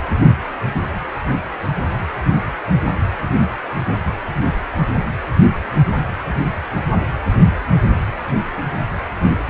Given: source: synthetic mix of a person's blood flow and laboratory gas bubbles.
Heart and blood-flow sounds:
Doppler ultrasound of blood flow; precordium
no bubbles
From the record:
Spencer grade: 0 (complete lack of bubble signals)

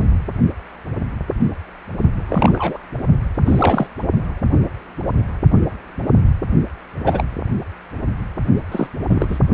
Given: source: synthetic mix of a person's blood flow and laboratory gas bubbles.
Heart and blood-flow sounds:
Doppler ultrasound of blood flow; precordium
2.17-2.77 s: bubbles
3.46-3.87 s: bubbles
7.04-7.25 s: bubbles
8.71-8.88 s: bubbles
9.08-9.26 s: bubbles
9.29-9.39 s: bubbles
From the record:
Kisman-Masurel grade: 222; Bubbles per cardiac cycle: several, 3 to 8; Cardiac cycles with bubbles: 10 to 50%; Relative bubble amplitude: moderate (0.250 to 0.450); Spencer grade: 2 (many but less than half of the cardiac periods contain bubble signals, singularly or in groups); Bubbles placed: only in the low amplitude regions of the cardiac cycle

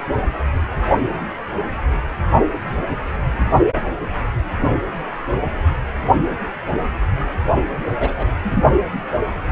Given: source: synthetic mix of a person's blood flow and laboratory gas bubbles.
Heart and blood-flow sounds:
Doppler ultrasound of blood flow; precordium
8.00-8.25 s: bubbles
8.43-8.63 s: bubbles
From the record:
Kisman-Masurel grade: 122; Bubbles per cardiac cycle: 1 to 2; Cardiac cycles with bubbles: 10 to 50%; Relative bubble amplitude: moderate (0.250 to 0.450); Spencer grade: 2 (many but less than half of the cardiac periods contain bubble signals, singularly or in groups); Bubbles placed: only in the low amplitude regions of the cardiac cycle

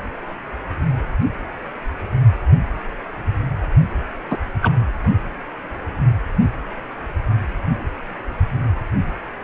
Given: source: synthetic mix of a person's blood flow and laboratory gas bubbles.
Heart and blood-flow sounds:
Doppler ultrasound of blood flow; precordium
4.30-4.38 s: bubbles
4.62-4.72 s: bubbles
From the record:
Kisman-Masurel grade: 113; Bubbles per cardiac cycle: 1 to 2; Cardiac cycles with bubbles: 1 to 10%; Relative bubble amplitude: loud (0.450 to 0.775); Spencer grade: 1 (occasional bubble signal discernible with the cardiac motion signal, with majority of cardiac periods free of bubbles); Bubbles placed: anywhere in the cardiac cycle

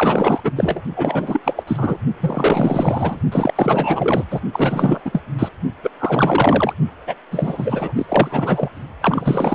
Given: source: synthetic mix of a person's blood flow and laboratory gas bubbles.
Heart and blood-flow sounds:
Doppler ultrasound of blood flow; precordium
0.00-0.40 s: bubbles
0.44-0.51 s: bubbles
0.55-0.82 s: bubbles
0.96-1.41 s: bubbles
1.44-1.63 s: bubbles
1.67-1.97 s: bubbles
2.20-3.21 s: bubbles
3.32-4.25 s: bubbles
4.30-4.41 s: bubbles
4.53-5.00 s: bubbles
5.05-5.21 s: bubbles
5.38-5.49 s: bubbles
5.83-5.91 s: bubbles
6.00-6.73 s: bubbles
7.07-7.15 s: bubbles
7.31-7.93 s: bubbles
7.96-8.05 s: bubbles
8.08-8.69 s: bubbles
9.01-9.55 s: bubbles
From the record:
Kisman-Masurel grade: 444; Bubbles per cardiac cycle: continuous sound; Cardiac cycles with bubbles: 100%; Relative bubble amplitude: maximal (0.775 to 0.999); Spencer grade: 4 (maximum detectable bubble signal sounding continuously throughout systole and diastole of every cardiac period, and overriding the amplitude of the normal cardiac signals); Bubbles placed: only in the low amplitude regions of the cardiac cycle

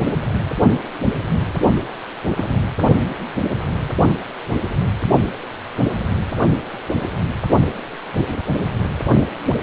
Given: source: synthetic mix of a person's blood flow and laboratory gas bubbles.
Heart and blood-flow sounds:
Doppler ultrasound of blood flow; precordium
2.34-2.60 s: bubbles
From the record:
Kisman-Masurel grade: 111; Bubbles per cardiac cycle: 1 to 2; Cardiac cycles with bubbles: 1 to 10%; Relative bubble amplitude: barely perceptible (0.100 to 0.250); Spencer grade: 1 (occasional bubble signal discernible with the cardiac motion signal, with majority of cardiac periods free of bubbles); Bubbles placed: only in the low amplitude regions of the cardiac cycle

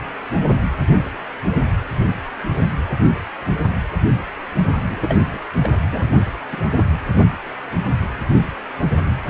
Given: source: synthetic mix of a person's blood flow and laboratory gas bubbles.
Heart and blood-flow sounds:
Doppler ultrasound of blood flow; precordium
4.89-5.40 s: bubbles
5.63-5.75 s: bubbles
5.92-6.04 s: bubbles
6.50-6.62 s: bubbles
6.76-6.83 s: bubbles
From the record:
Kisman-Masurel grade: 222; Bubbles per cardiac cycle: several, 3 to 8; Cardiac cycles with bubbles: 10 to 50%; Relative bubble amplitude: moderate (0.250 to 0.450); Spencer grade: 2 (many but less than half of the cardiac periods contain bubble signals, singularly or in groups); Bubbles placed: anywhere in the cardiac cycle

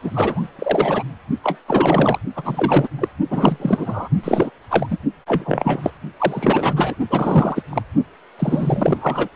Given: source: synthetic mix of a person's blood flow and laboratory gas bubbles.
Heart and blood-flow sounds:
Doppler ultrasound of blood flow; precordium
0.01-0.48 s: bubbles
0.58-1.04 s: bubbles
1.44-1.58 s: bubbles
1.67-2.18 s: bubbles
2.35-2.89 s: bubbles
2.98-3.08 s: bubbles
3.29-4.08 s: bubbles
4.23-4.50 s: bubbles
4.69-4.86 s: bubbles
4.89-4.97 s: bubbles
5.27-5.90 s: bubbles
6.17-6.95 s: bubbles
7.10-7.62 s: bubbles
7.69-7.82 s: bubbles
8.38-9.29 s: bubbles
From the record:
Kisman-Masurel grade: 343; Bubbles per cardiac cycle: rolling drumbeat, 9 or more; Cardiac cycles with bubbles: 100%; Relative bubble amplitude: loud (0.450 to 0.775); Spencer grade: 3 (all of the cardiac periods contain showers or single bubble signals, but not dominating or overriding the cardiac motion signals); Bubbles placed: only in the low amplitude regions of the cardiac cycle

